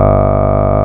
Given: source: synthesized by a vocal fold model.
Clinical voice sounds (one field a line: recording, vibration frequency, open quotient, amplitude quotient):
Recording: sustained vowel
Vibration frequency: 50 Hz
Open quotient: 0.4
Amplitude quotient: 1.1